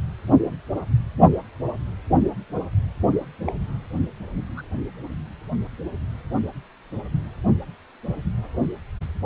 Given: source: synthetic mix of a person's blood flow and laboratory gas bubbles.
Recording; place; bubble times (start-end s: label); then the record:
Doppler ultrasound of blood flow; precordium
3.46-3.52 s: bubbles
4.57-4.62 s: bubbles
From the record:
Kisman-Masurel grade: 121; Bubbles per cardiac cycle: 1 to 2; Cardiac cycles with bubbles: 10 to 50%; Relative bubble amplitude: barely perceptible (0.100 to 0.250); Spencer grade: 2 (many but less than half of the cardiac periods contain bubble signals, singularly or in groups); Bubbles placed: only in the low amplitude regions of the cardiac cycle